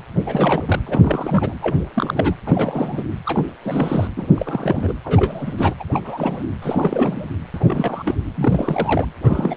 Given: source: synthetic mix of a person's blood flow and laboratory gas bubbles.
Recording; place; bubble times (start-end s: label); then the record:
Doppler ultrasound of blood flow; precordium
0.25-0.79 s: bubbles
0.86-1.55 s: bubbles
1.62-1.76 s: bubbles
1.94-2.35 s: bubbles
2.46-3.06 s: bubbles
3.25-3.54 s: bubbles
3.63-4.08 s: bubbles
4.17-4.30 s: bubbles
4.36-4.94 s: bubbles
5.04-5.74 s: bubbles
5.79-5.83 s: bubbles
5.92-6.01 s: bubbles
6.05-6.43 s: bubbles
6.62-7.29 s: bubbles
7.54-8.17 s: bubbles
8.34-9.10 s: bubbles
9.23-9.56 s: bubbles
From the record:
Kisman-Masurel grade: 342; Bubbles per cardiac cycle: rolling drumbeat, 9 or more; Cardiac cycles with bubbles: 100%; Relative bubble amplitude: moderate (0.250 to 0.450); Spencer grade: 3 (all of the cardiac periods contain showers or single bubble signals, but not dominating or overriding the cardiac motion signals); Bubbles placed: anywhere in the cardiac cycle